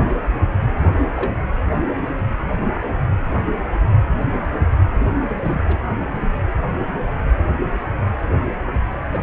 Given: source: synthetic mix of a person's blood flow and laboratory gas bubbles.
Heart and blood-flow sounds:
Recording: Doppler ultrasound of blood flow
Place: precordium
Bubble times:
1.16-1.31 s: bubbles
5.42-5.76 s: bubbles
8.44-8.54 s: bubbles
9.12-9.18 s: bubbles
From the record:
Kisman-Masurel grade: 121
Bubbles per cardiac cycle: 1 to 2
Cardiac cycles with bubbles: 10 to 50%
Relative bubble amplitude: barely perceptible (0.100 to 0.250)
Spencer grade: 2 (many but less than half of the cardiac periods contain bubble signals, singularly or in groups)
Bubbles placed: anywhere in the cardiac cycle

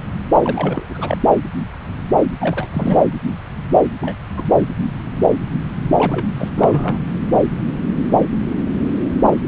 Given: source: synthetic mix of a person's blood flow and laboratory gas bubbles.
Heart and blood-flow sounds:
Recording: Doppler ultrasound of blood flow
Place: subclavian vein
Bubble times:
0.43-0.85 s: bubbles
0.89-1.18 s: bubbles
2.40-2.67 s: bubbles
2.73-3.03 s: bubbles
4.00-4.15 s: bubbles
4.35-4.46 s: bubbles
4.49-4.67 s: bubbles
5.98-6.25 s: bubbles
6.37-6.50 s: bubbles
6.56-6.99 s: bubbles
From the record:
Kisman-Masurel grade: 222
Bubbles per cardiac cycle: several, 3 to 8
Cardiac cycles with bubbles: 10 to 50%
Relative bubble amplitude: moderate (0.250 to 0.450)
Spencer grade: 2 (many but less than half of the cardiac periods contain bubble signals, singularly or in groups)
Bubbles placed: anywhere in the cardiac cycle

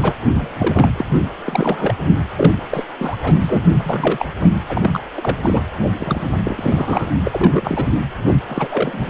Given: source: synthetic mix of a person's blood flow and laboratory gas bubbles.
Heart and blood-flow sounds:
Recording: Doppler ultrasound of blood flow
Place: precordium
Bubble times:
0.00-0.15 s: bubbles
0.41-0.49 s: bubbles
0.58-0.90 s: bubbles
0.97-1.04 s: bubbles
1.17-1.24 s: bubbles
1.46-1.95 s: bubbles
2.36-2.53 s: bubbles
2.70-2.84 s: bubbles
3.00-3.17 s: bubbles
3.22-3.33 s: bubbles
3.40-3.64 s: bubbles
3.79-4.26 s: bubbles
4.40-4.50 s: bubbles
4.68-4.99 s: bubbles
5.16-5.36 s: bubbles
5.42-5.62 s: bubbles
5.96-6.39 s: bubbles
6.45-7.08 s: bubbles
7.25-7.85 s: bubbles
8.26-8.34 s: bubbles
8.47-9.10 s: bubbles
From the record:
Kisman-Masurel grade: 342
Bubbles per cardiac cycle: rolling drumbeat, 9 or more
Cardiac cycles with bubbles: 100%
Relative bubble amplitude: moderate (0.250 to 0.450)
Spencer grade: 3 (all of the cardiac periods contain showers or single bubble signals, but not dominating or overriding the cardiac motion signals)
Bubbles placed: anywhere in the cardiac cycle

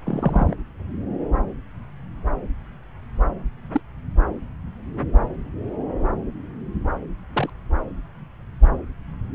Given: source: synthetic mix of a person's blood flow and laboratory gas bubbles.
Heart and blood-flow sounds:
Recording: Doppler ultrasound of blood flow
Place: subclavian vein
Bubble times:
0.04-0.54 s: bubbles
3.72-3.81 s: bubbles
7.33-7.50 s: bubbles
From the record:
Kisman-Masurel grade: 122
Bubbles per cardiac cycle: 1 to 2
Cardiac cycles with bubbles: 10 to 50%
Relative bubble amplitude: moderate (0.250 to 0.450)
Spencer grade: 2 (many but less than half of the cardiac periods contain bubble signals, singularly or in groups)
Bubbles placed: anywhere in the cardiac cycle

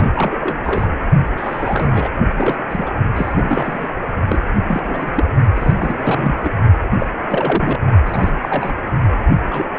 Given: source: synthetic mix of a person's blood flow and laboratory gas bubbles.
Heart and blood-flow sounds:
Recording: Doppler ultrasound of blood flow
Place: precordium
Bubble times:
0.00-0.07 s: bubbles
0.13-0.36 s: bubbles
0.39-0.87 s: bubbles
1.36-2.10 s: bubbles
2.36-2.56 s: bubbles
2.69-2.90 s: bubbles
3.15-3.87 s: bubbles
4.02-4.07 s: bubbles
4.28-4.39 s: bubbles
4.67-5.27 s: bubbles
5.56-5.74 s: bubbles
5.79-6.35 s: bubbles
6.39-6.49 s: bubbles
7.00-7.08 s: bubbles
7.25-7.79 s: bubbles
8.05-8.30 s: bubbles
8.42-8.73 s: bubbles
9.50-9.67 s: bubbles
From the record:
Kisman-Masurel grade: 342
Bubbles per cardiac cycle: rolling drumbeat, 9 or more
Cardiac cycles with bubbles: 100%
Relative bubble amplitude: moderate (0.250 to 0.450)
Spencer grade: 3 (all of the cardiac periods contain showers or single bubble signals, but not dominating or overriding the cardiac motion signals)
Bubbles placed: only in the low amplitude regions of the cardiac cycle

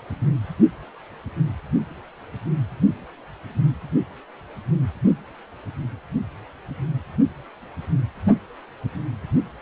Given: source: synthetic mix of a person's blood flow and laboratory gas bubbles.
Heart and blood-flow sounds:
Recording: Doppler ultrasound of blood flow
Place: precordium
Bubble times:
no bubbles
From the record:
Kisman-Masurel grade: 000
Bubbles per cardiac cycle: 0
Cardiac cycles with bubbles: 0%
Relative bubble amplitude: no bubbles discernible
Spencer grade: 0 (complete lack of bubble signals)

